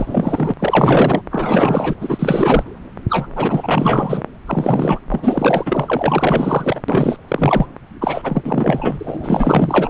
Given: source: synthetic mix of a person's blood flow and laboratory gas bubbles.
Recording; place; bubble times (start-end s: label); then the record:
Doppler ultrasound of blood flow; subclavian vein
0.00-0.54 s: bubbles
0.59-1.22 s: bubbles
1.30-1.95 s: bubbles
2.01-2.65 s: bubbles
3.09-3.27 s: bubbles
3.36-4.23 s: bubbles
4.46-4.99 s: bubbles
5.10-6.82 s: bubbles
6.88-7.17 s: bubbles
7.28-7.67 s: bubbles
8.01-8.42 s: bubbles
8.45-9.90 s: bubbles
From the record:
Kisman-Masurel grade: 444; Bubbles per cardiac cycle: continuous sound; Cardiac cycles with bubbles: 100%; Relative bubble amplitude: maximal (0.775 to 0.999); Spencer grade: 4 (maximum detectable bubble signal sounding continuously throughout systole and diastole of every cardiac period, and overriding the amplitude of the normal cardiac signals); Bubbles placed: anywhere in the cardiac cycle